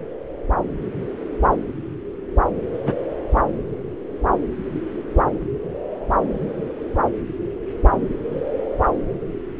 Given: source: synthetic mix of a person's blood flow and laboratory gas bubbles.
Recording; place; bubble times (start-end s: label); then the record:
Doppler ultrasound of blood flow; subclavian vein
2.85-2.94 s: bubbles
From the record:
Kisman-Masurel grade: 122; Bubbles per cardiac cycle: 1 to 2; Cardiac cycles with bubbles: 10 to 50%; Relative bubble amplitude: moderate (0.250 to 0.450); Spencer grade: 2 (many but less than half of the cardiac periods contain bubble signals, singularly or in groups); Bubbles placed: anywhere in the cardiac cycle